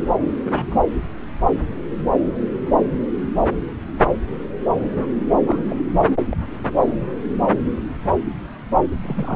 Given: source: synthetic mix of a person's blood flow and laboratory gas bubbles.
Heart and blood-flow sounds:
Doppler ultrasound of blood flow; subclavian vein
0.45-0.75 s: bubbles
5.46-5.62 s: bubbles
5.69-5.82 s: bubbles
6.29-6.37 s: bubbles
9.01-9.36 s: bubbles
From the record:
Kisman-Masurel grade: 121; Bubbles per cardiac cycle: 1 to 2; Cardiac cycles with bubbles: 10 to 50%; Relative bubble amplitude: barely perceptible (0.100 to 0.250); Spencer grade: 2 (many but less than half of the cardiac periods contain bubble signals, singularly or in groups); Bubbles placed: anywhere in the cardiac cycle

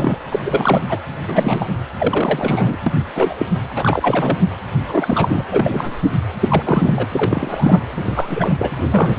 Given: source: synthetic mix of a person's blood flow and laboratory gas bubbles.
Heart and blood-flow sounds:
Doppler ultrasound of blood flow; precordium
0.00-0.18 s: bubbles
0.31-0.40 s: bubbles
0.45-1.01 s: bubbles
1.27-1.69 s: bubbles
1.98-2.76 s: bubbles
2.86-2.94 s: bubbles
3.12-3.35 s: bubbles
3.38-3.46 s: bubbles
3.75-4.38 s: bubbles
4.88-5.42 s: bubbles
5.50-5.99 s: bubbles
6.40-7.09 s: bubbles
7.12-7.83 s: bubbles
7.97-8.72 s: bubbles
8.91-9.19 s: bubbles
From the record:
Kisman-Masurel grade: 343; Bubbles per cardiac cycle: rolling drumbeat, 9 or more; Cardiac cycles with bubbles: 100%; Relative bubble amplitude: loud (0.450 to 0.775); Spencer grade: 3 (all of the cardiac periods contain showers or single bubble signals, but not dominating or overriding the cardiac motion signals); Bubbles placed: anywhere in the cardiac cycle

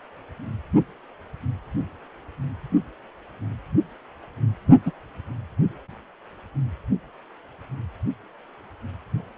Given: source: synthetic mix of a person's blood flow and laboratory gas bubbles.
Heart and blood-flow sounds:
Doppler ultrasound of blood flow; precordium
4.86-4.91 s: bubbles
From the record:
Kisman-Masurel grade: 112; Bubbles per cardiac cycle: 1 to 2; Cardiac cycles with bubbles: 1 to 10%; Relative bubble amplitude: moderate (0.250 to 0.450); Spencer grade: 1 (occasional bubble signal discernible with the cardiac motion signal, with majority of cardiac periods free of bubbles); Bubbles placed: only in the low amplitude regions of the cardiac cycle

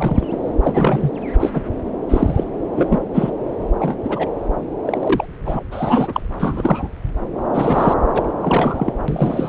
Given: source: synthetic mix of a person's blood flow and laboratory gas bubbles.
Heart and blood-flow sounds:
Doppler ultrasound of blood flow; subclavian vein
0.00-0.27 s: bubbles
0.30-0.40 s: bubbles
0.62-1.10 s: bubbles
1.40-1.50 s: bubbles
1.53-1.62 s: bubbles
2.08-2.44 s: bubbles
2.75-3.00 s: bubbles
3.14-3.31 s: bubbles
3.79-3.97 s: bubbles
4.04-4.27 s: bubbles
4.84-5.26 s: bubbles
5.44-5.59 s: bubbles
5.71-6.21 s: bubbles
6.39-6.88 s: bubbles
7.54-7.94 s: bubbles
8.13-8.23 s: bubbles
8.40-8.93 s: bubbles
9.08-9.49 s: bubbles
From the record:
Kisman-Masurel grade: 243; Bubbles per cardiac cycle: several, 3 to 8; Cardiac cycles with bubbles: 100%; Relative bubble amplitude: loud (0.450 to 0.775); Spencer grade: 3 (all of the cardiac periods contain showers or single bubble signals, but not dominating or overriding the cardiac motion signals); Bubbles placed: anywhere in the cardiac cycle

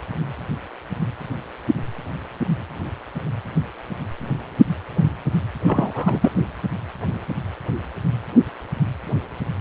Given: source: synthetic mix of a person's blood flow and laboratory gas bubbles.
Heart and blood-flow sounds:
Doppler ultrasound of blood flow; precordium
5.67-6.31 s: bubbles
From the record:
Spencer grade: 1 (occasional bubble signal discernible with the cardiac motion signal, with majority of cardiac periods free of bubbles); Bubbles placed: anywhere in the cardiac cycle

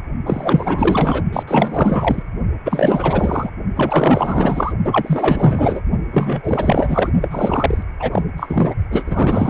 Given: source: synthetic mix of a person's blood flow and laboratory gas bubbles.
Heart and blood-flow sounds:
Doppler ultrasound of blood flow; precordium
0.26-1.23 s: bubbles
1.32-1.43 s: bubbles
1.47-2.23 s: bubbles
2.65-3.50 s: bubbles
3.75-4.73 s: bubbles
4.85-5.83 s: bubbles
6.12-7.12 s: bubbles
7.21-7.28 s: bubbles
7.31-7.83 s: bubbles
8.00-8.23 s: bubbles
8.37-8.74 s: bubbles
8.91-9.49 s: bubbles
From the record:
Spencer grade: 4 (maximum detectable bubble signal sounding continuously throughout systole and diastole of every cardiac period, and overriding the amplitude of the normal cardiac signals); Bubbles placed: only in the low amplitude regions of the cardiac cycle

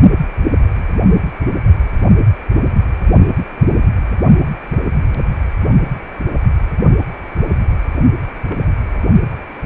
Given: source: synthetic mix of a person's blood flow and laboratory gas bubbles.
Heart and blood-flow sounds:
Doppler ultrasound of blood flow; precordium
8.47-8.66 s: bubbles
From the record:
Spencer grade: 1 (occasional bubble signal discernible with the cardiac motion signal, with majority of cardiac periods free of bubbles); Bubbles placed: only in the low amplitude regions of the cardiac cycle

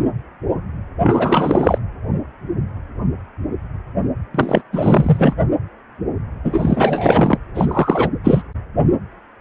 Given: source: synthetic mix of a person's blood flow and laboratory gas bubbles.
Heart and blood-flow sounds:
Doppler ultrasound of blood flow; precordium
1.03-1.78 s: bubbles
4.34-4.62 s: bubbles
4.73-5.33 s: bubbles
6.44-7.37 s: bubbles
7.54-8.09 s: bubbles
8.24-8.43 s: bubbles
From the record:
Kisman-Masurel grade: 333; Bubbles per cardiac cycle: rolling drumbeat, 9 or more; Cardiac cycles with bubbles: 50 to 99%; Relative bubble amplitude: loud (0.450 to 0.775); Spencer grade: 3 (all of the cardiac periods contain showers or single bubble signals, but not dominating or overriding the cardiac motion signals); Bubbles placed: anywhere in the cardiac cycle

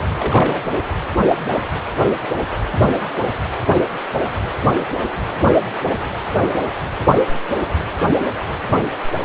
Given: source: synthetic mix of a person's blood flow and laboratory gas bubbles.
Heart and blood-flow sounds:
Doppler ultrasound of blood flow; precordium
0.18-0.61 s: bubbles
From the record:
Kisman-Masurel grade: 211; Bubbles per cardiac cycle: several, 3 to 8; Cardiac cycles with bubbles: 1 to 10%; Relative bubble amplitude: barely perceptible (0.100 to 0.250); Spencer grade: 1 (occasional bubble signal discernible with the cardiac motion signal, with majority of cardiac periods free of bubbles); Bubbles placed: anywhere in the cardiac cycle

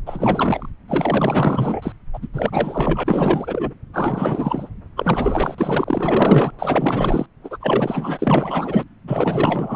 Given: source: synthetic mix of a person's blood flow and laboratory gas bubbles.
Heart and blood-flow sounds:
Doppler ultrasound of blood flow; subclavian vein
0.06-0.69 s: bubbles
0.88-1.92 s: bubbles
2.13-2.28 s: bubbles
2.33-3.74 s: bubbles
3.93-4.70 s: bubbles
4.96-5.55 s: bubbles
5.58-6.52 s: bubbles
6.58-7.26 s: bubbles
7.44-7.58 s: bubbles
7.60-8.84 s: bubbles
9.07-9.76 s: bubbles
From the record:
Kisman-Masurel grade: 444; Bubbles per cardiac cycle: continuous sound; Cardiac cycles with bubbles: 100%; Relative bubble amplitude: maximal (0.775 to 0.999); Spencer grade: 4 (maximum detectable bubble signal sounding continuously throughout systole and diastole of every cardiac period, and overriding the amplitude of the normal cardiac signals); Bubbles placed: anywhere in the cardiac cycle

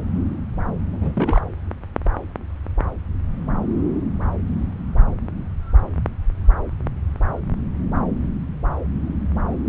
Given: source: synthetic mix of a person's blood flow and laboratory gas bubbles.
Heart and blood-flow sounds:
Doppler ultrasound of blood flow; subclavian vein
0.92-1.41 s: bubbles
From the record:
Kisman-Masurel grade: 211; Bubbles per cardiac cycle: several, 3 to 8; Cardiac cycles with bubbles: 1 to 10%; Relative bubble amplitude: barely perceptible (0.100 to 0.250); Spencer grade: 1 (occasional bubble signal discernible with the cardiac motion signal, with majority of cardiac periods free of bubbles); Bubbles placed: anywhere in the cardiac cycle

